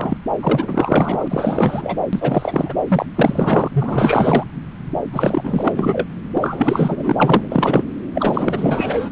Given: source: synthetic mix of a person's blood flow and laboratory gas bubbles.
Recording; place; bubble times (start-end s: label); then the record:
Doppler ultrasound of blood flow; subclavian vein
0.00-0.17 s: bubbles
0.41-1.97 s: bubbles
2.12-2.74 s: bubbles
2.88-3.06 s: bubbles
3.15-3.68 s: bubbles
3.73-4.44 s: bubbles
5.12-6.08 s: bubbles
6.33-7.83 s: bubbles
8.14-9.09 s: bubbles
From the record:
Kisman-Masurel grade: 444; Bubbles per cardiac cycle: continuous sound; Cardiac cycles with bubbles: 100%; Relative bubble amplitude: maximal (0.775 to 0.999); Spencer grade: 4 (maximum detectable bubble signal sounding continuously throughout systole and diastole of every cardiac period, and overriding the amplitude of the normal cardiac signals); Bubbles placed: anywhere in the cardiac cycle